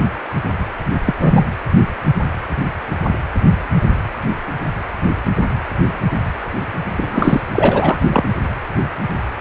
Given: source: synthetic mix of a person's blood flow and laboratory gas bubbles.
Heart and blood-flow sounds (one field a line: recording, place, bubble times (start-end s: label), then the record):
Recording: Doppler ultrasound of blood flow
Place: precordium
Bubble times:
1.05-1.16 s: bubbles
1.20-1.44 s: bubbles
6.97-7.41 s: bubbles
7.52-7.98 s: bubbles
8.09-8.29 s: bubbles
From the record:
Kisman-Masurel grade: 223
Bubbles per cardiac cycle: several, 3 to 8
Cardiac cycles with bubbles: 10 to 50%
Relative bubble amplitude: loud (0.450 to 0.775)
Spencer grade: 2 (many but less than half of the cardiac periods contain bubble signals, singularly or in groups)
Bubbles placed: anywhere in the cardiac cycle